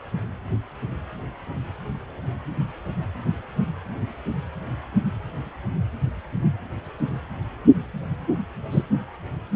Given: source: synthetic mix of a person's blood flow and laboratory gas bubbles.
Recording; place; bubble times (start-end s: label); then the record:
Doppler ultrasound of blood flow; precordium
8.71-8.83 s: bubbles
From the record:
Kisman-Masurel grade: 113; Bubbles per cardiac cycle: 1 to 2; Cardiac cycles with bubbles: 1 to 10%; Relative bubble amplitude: loud (0.450 to 0.775); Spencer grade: 1 (occasional bubble signal discernible with the cardiac motion signal, with majority of cardiac periods free of bubbles); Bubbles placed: anywhere in the cardiac cycle